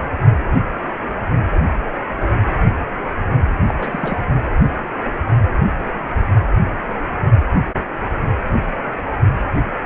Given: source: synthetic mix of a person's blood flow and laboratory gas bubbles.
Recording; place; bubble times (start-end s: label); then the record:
Doppler ultrasound of blood flow; precordium
3.69-4.19 s: bubbles
From the record:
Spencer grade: 1 (occasional bubble signal discernible with the cardiac motion signal, with majority of cardiac periods free of bubbles); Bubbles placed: anywhere in the cardiac cycle